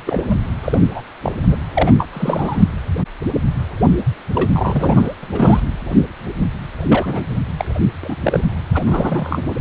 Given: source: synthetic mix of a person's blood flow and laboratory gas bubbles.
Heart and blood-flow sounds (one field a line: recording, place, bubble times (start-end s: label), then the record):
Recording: Doppler ultrasound of blood flow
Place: precordium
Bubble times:
0.06-0.35 s: bubbles
0.61-0.80 s: bubbles
0.94-1.02 s: bubbles
1.23-1.33 s: bubbles
1.47-1.57 s: bubbles
1.75-1.94 s: bubbles
1.98-2.07 s: bubbles
2.13-2.64 s: bubbles
3.79-3.86 s: bubbles
4.35-4.50 s: bubbles
4.54-5.15 s: bubbles
5.23-5.28 s: bubbles
5.31-5.61 s: bubbles
6.83-7.27 s: bubbles
7.57-7.65 s: bubbles
8.03-8.16 s: bubbles
8.22-8.42 s: bubbles
8.74-8.83 s: bubbles
8.86-9.44 s: bubbles
9.46-9.55 s: bubbles
From the record:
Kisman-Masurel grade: 242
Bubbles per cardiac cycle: several, 3 to 8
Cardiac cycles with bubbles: 100%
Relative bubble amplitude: moderate (0.250 to 0.450)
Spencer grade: 3 (all of the cardiac periods contain showers or single bubble signals, but not dominating or overriding the cardiac motion signals)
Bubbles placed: anywhere in the cardiac cycle